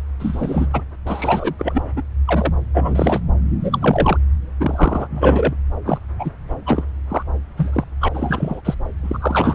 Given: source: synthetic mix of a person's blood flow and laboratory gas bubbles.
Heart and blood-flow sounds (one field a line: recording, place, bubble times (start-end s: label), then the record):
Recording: Doppler ultrasound of blood flow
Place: subclavian vein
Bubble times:
0.19-0.67 s: bubbles
0.73-0.81 s: bubbles
1.06-1.54 s: bubbles
1.58-1.83 s: bubbles
1.96-2.02 s: bubbles
2.25-2.54 s: bubbles
2.74-3.20 s: bubbles
3.60-4.17 s: bubbles
4.60-5.07 s: bubbles
5.10-5.54 s: bubbles
5.85-5.98 s: bubbles
6.18-6.31 s: bubbles
6.66-6.85 s: bubbles
7.09-7.22 s: bubbles
7.57-7.84 s: bubbles
8.01-8.09 s: bubbles
8.13-8.61 s: bubbles
8.65-8.75 s: bubbles
9.03-9.55 s: bubbles
From the record:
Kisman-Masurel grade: 243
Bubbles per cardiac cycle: several, 3 to 8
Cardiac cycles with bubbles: 100%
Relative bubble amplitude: loud (0.450 to 0.775)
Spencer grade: 3 (all of the cardiac periods contain showers or single bubble signals, but not dominating or overriding the cardiac motion signals)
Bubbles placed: anywhere in the cardiac cycle